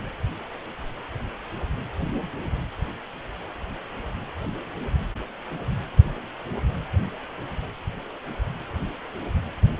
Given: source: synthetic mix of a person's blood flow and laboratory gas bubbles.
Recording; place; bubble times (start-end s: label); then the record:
Doppler ultrasound of blood flow; precordium
no bubbles
From the record:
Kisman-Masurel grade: 000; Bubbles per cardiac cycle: 0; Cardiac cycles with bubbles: 0%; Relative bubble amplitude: no bubbles discernible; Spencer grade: 0 (complete lack of bubble signals)